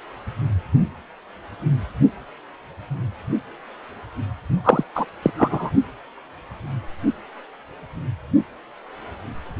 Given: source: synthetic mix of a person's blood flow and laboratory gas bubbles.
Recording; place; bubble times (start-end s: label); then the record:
Doppler ultrasound of blood flow; precordium
4.64-4.83 s: bubbles
4.95-5.05 s: bubbles
5.22-5.31 s: bubbles
5.37-5.72 s: bubbles
From the record:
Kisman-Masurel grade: 213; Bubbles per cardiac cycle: several, 3 to 8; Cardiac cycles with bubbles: 1 to 10%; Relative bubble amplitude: loud (0.450 to 0.775); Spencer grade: 1 (occasional bubble signal discernible with the cardiac motion signal, with majority of cardiac periods free of bubbles); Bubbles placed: only in the low amplitude regions of the cardiac cycle